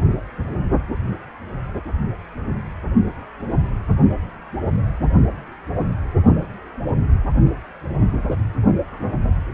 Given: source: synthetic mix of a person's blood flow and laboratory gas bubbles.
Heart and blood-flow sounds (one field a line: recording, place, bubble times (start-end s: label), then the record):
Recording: Doppler ultrasound of blood flow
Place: precordium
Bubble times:
no bubbles
From the record:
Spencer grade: 0 (complete lack of bubble signals)